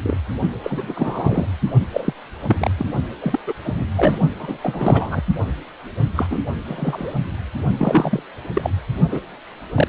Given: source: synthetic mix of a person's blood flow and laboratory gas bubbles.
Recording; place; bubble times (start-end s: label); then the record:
Doppler ultrasound of blood flow; precordium
0.02-0.17 s: bubbles
0.63-1.46 s: bubbles
1.93-2.13 s: bubbles
2.47-2.71 s: bubbles
2.77-2.85 s: bubbles
3.21-3.39 s: bubbles
3.47-3.54 s: bubbles
3.63-3.83 s: bubbles
3.96-4.18 s: bubbles
4.39-4.58 s: bubbles
4.63-5.22 s: bubbles
6.16-6.27 s: bubbles
6.30-6.40 s: bubbles
6.64-7.14 s: bubbles
7.78-8.21 s: bubbles
8.54-8.70 s: bubbles
9.08-9.20 s: bubbles
9.74-9.88 s: bubbles
From the record:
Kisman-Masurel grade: 242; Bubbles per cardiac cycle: several, 3 to 8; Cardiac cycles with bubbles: 100%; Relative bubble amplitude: moderate (0.250 to 0.450); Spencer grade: 3 (all of the cardiac periods contain showers or single bubble signals, but not dominating or overriding the cardiac motion signals); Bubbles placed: only in the low amplitude regions of the cardiac cycle